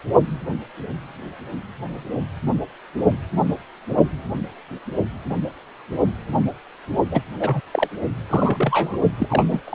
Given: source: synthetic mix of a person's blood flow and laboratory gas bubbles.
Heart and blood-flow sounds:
Doppler ultrasound of blood flow; precordium
7.11-7.21 s: bubbles
7.40-7.60 s: bubbles
7.71-7.88 s: bubbles
8.29-8.98 s: bubbles
9.17-9.46 s: bubbles
9.49-9.62 s: bubbles
9.65-9.75 s: bubbles
From the record:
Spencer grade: 2 (many but less than half of the cardiac periods contain bubble signals, singularly or in groups); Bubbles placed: only in the low amplitude regions of the cardiac cycle

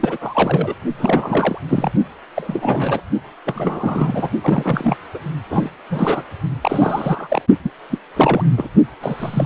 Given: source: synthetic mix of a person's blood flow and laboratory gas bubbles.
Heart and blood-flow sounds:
Doppler ultrasound of blood flow; precordium
0.00-0.17 s: bubbles
0.21-0.74 s: bubbles
0.98-1.58 s: bubbles
1.69-1.92 s: bubbles
2.36-3.01 s: bubbles
3.45-4.29 s: bubbles
4.42-4.97 s: bubbles
5.14-5.18 s: bubbles
5.49-5.70 s: bubbles
5.90-6.23 s: bubbles
6.61-7.42 s: bubbles
7.63-7.71 s: bubbles
7.89-7.98 s: bubbles
8.16-8.44 s: bubbles
8.57-8.69 s: bubbles
9.01-9.45 s: bubbles
From the record:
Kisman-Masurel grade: 342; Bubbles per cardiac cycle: rolling drumbeat, 9 or more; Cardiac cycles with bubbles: 100%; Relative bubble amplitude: moderate (0.250 to 0.450); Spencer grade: 3 (all of the cardiac periods contain showers or single bubble signals, but not dominating or overriding the cardiac motion signals); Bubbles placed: only in the low amplitude regions of the cardiac cycle

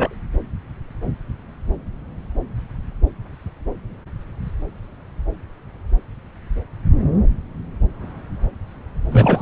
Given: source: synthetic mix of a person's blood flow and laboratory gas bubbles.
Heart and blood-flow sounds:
Doppler ultrasound of blood flow; subclavian vein
0.00-0.15 s: bubbles
9.12-9.42 s: bubbles
From the record:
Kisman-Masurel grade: 213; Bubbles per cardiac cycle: several, 3 to 8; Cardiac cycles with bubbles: 1 to 10%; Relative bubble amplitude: loud (0.450 to 0.775); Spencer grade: 1 (occasional bubble signal discernible with the cardiac motion signal, with majority of cardiac periods free of bubbles); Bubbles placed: anywhere in the cardiac cycle

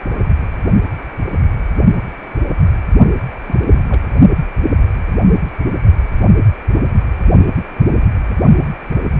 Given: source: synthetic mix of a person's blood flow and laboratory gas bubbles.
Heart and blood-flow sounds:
Doppler ultrasound of blood flow; precordium
3.48-3.83 s: bubbles
3.88-4.02 s: bubbles
From the record:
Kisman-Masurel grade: 211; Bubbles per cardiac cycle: several, 3 to 8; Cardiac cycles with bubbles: 1 to 10%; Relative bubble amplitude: barely perceptible (0.100 to 0.250); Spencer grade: 1 (occasional bubble signal discernible with the cardiac motion signal, with majority of cardiac periods free of bubbles); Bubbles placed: only in the low amplitude regions of the cardiac cycle

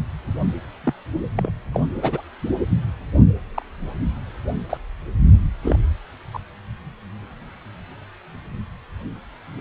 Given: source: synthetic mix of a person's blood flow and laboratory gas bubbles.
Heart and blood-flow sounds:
Doppler ultrasound of blood flow; precordium
0.83-0.93 s: bubbles
1.36-1.50 s: bubbles
1.73-1.80 s: bubbles
2.01-2.21 s: bubbles
3.54-3.62 s: bubbles
4.69-4.77 s: bubbles
5.62-5.79 s: bubbles
6.33-6.39 s: bubbles
From the record:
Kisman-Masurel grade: 122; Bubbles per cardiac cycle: 1 to 2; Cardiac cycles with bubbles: 10 to 50%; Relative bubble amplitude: moderate (0.250 to 0.450); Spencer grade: 2 (many but less than half of the cardiac periods contain bubble signals, singularly or in groups); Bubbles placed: anywhere in the cardiac cycle

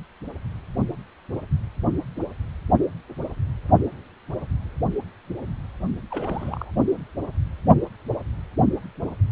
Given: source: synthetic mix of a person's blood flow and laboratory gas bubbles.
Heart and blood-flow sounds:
Doppler ultrasound of blood flow; precordium
6.10-6.71 s: bubbles
From the record:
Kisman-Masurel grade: 211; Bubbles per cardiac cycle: several, 3 to 8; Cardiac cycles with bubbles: 1 to 10%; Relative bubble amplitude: barely perceptible (0.100 to 0.250); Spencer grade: 1 (occasional bubble signal discernible with the cardiac motion signal, with majority of cardiac periods free of bubbles); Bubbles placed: only in the low amplitude regions of the cardiac cycle

